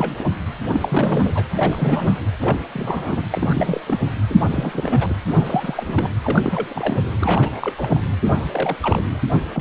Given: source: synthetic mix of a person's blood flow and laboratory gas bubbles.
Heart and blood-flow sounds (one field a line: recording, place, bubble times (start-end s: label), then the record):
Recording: Doppler ultrasound of blood flow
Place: precordium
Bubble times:
0.00-0.16 s: bubbles
0.18-0.24 s: bubbles
0.73-1.45 s: bubbles
1.56-2.25 s: bubbles
2.41-2.58 s: bubbles
2.73-3.22 s: bubbles
3.32-3.80 s: bubbles
3.87-3.99 s: bubbles
4.29-4.35 s: bubbles
4.50-5.17 s: bubbles
5.27-6.13 s: bubbles
6.23-7.01 s: bubbles
7.21-8.00 s: bubbles
8.23-8.77 s: bubbles
8.82-9.06 s: bubbles
9.11-9.19 s: bubbles
9.54-9.61 s: bubbles
From the record:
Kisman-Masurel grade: 342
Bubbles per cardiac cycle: rolling drumbeat, 9 or more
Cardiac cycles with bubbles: 100%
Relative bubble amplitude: moderate (0.250 to 0.450)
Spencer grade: 3 (all of the cardiac periods contain showers or single bubble signals, but not dominating or overriding the cardiac motion signals)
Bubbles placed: anywhere in the cardiac cycle